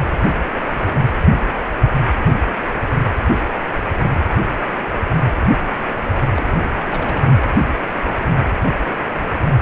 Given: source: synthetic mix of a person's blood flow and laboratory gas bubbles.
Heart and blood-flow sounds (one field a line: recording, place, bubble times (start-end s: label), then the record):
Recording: Doppler ultrasound of blood flow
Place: precordium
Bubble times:
6.35-6.46 s: bubbles
6.84-7.37 s: bubbles
From the record:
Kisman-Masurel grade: 211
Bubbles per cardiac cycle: several, 3 to 8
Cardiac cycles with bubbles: 1 to 10%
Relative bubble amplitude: barely perceptible (0.100 to 0.250)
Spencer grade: 1 (occasional bubble signal discernible with the cardiac motion signal, with majority of cardiac periods free of bubbles)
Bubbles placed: anywhere in the cardiac cycle